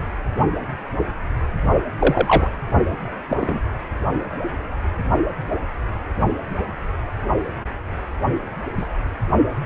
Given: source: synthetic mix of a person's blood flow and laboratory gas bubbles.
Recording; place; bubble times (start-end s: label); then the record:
Doppler ultrasound of blood flow; precordium
1.99-2.49 s: bubbles
3.28-3.60 s: bubbles
8.77-8.86 s: bubbles
From the record:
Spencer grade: 2 (many but less than half of the cardiac periods contain bubble signals, singularly or in groups); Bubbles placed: only in the low amplitude regions of the cardiac cycle